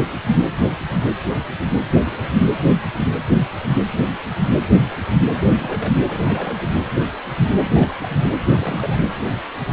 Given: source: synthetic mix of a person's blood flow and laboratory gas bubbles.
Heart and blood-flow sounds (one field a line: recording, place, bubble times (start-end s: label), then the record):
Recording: Doppler ultrasound of blood flow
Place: precordium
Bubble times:
1.90-2.29 s: bubbles
5.33-6.00 s: bubbles
6.07-6.62 s: bubbles
7.75-7.96 s: bubbles
7.98-8.31 s: bubbles
8.52-8.99 s: bubbles
From the record:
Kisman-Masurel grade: 221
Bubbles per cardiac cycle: several, 3 to 8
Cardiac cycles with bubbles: 10 to 50%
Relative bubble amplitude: barely perceptible (0.100 to 0.250)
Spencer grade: 2 (many but less than half of the cardiac periods contain bubble signals, singularly or in groups)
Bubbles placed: anywhere in the cardiac cycle